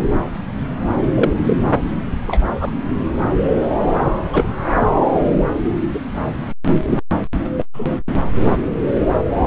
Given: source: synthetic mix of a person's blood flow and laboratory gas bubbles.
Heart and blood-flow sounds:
Doppler ultrasound of blood flow; subclavian vein
1.15-1.31 s: bubbles
1.47-1.56 s: bubbles
2.27-2.40 s: bubbles
2.60-2.71 s: bubbles
4.33-4.47 s: bubbles
5.94-6.00 s: bubbles
6.64-6.74 s: bubbles
6.87-7.02 s: bubbles
7.60-7.66 s: bubbles
7.74-7.99 s: bubbles
From the record:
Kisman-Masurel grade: 122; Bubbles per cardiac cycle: 1 to 2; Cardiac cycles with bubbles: 10 to 50%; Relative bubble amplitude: moderate (0.250 to 0.450); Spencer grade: 2 (many but less than half of the cardiac periods contain bubble signals, singularly or in groups); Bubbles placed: anywhere in the cardiac cycle

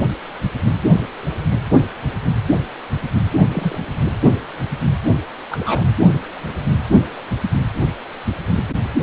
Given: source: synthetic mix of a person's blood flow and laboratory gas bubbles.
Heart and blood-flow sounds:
Doppler ultrasound of blood flow; precordium
3.53-3.78 s: bubbles
5.51-5.91 s: bubbles
From the record:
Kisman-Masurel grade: 122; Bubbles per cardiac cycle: 1 to 2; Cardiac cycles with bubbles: 10 to 50%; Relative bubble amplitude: moderate (0.250 to 0.450); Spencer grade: 2 (many but less than half of the cardiac periods contain bubble signals, singularly or in groups); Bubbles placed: only in the low amplitude regions of the cardiac cycle

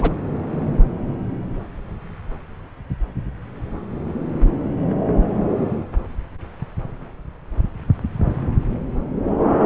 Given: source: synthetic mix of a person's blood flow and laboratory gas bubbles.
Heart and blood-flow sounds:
Doppler ultrasound of blood flow; subclavian vein
0.00-0.12 s: bubbles
From the record:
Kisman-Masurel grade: 222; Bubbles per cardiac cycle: several, 3 to 8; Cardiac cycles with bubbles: 10 to 50%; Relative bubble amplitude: moderate (0.250 to 0.450); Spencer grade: 2 (many but less than half of the cardiac periods contain bubble signals, singularly or in groups); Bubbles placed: anywhere in the cardiac cycle

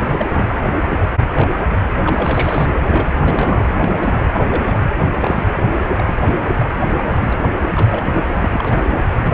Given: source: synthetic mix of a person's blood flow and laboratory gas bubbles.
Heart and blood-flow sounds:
Doppler ultrasound of blood flow; precordium
0.00-0.47 s: bubbles
0.88-0.97 s: bubbles
1.34-1.49 s: bubbles
2.03-2.67 s: bubbles
2.76-3.13 s: bubbles
3.21-3.62 s: bubbles
3.80-4.25 s: bubbles
4.33-4.83 s: bubbles
5.20-5.47 s: bubbles
5.56-5.63 s: bubbles
5.97-6.15 s: bubbles
6.17-6.54 s: bubbles
6.58-6.69 s: bubbles
6.94-7.39 s: bubbles
7.63-7.68 s: bubbles
7.73-8.26 s: bubbles
8.38-8.94 s: bubbles
9.15-9.34 s: bubbles
From the record:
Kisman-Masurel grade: 242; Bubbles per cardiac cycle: several, 3 to 8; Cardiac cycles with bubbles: 100%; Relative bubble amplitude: moderate (0.250 to 0.450); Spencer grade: 3 (all of the cardiac periods contain showers or single bubble signals, but not dominating or overriding the cardiac motion signals); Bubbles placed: anywhere in the cardiac cycle

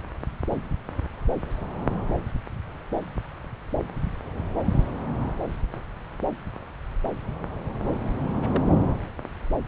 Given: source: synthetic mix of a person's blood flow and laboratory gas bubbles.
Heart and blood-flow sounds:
Doppler ultrasound of blood flow; subclavian vein
8.11-8.14 s: bubbles
8.24-8.62 s: bubbles
From the record:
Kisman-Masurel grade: 211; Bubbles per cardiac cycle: several, 3 to 8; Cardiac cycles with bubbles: 1 to 10%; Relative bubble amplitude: barely perceptible (0.100 to 0.250); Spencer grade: 1 (occasional bubble signal discernible with the cardiac motion signal, with majority of cardiac periods free of bubbles); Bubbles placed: anywhere in the cardiac cycle

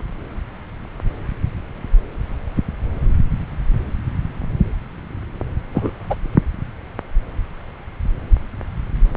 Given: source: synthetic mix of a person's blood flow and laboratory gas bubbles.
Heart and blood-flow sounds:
Doppler ultrasound of blood flow; subclavian vein
5.75-5.91 s: bubbles
6.10-6.15 s: bubbles
From the record:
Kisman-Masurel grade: 123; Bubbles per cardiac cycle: 1 to 2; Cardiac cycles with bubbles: 10 to 50%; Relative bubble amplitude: loud (0.450 to 0.775); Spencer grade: 2 (many but less than half of the cardiac periods contain bubble signals, singularly or in groups); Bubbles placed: anywhere in the cardiac cycle

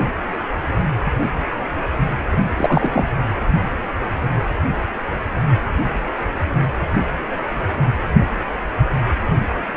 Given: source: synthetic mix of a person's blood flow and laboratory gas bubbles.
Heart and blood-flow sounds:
Doppler ultrasound of blood flow; precordium
2.56-3.05 s: bubbles
From the record:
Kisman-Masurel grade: 223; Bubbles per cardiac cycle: several, 3 to 8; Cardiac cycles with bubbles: 10 to 50%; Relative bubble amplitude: loud (0.450 to 0.775); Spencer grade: 2 (many but less than half of the cardiac periods contain bubble signals, singularly or in groups); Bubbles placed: anywhere in the cardiac cycle

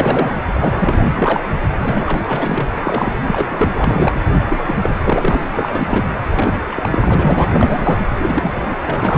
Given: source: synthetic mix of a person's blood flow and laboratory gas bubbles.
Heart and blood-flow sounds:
Doppler ultrasound of blood flow; precordium
0.00-0.36 s: bubbles
0.53-1.12 s: bubbles
1.15-1.42 s: bubbles
1.76-2.23 s: bubbles
2.27-2.69 s: bubbles
2.74-3.16 s: bubbles
3.27-3.69 s: bubbles
3.77-4.14 s: bubbles
4.34-4.93 s: bubbles
5.03-5.42 s: bubbles
5.54-6.05 s: bubbles
6.35-6.60 s: bubbles
6.71-7.48 s: bubbles
7.52-8.03 s: bubbles
8.14-8.53 s: bubbles
8.55-8.62 s: bubbles
8.69-8.76 s: bubbles
8.84-9.18 s: bubbles
From the record:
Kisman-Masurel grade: 342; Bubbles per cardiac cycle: rolling drumbeat, 9 or more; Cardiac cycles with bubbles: 100%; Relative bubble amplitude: moderate (0.250 to 0.450); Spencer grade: 3 (all of the cardiac periods contain showers or single bubble signals, but not dominating or overriding the cardiac motion signals); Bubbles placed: anywhere in the cardiac cycle

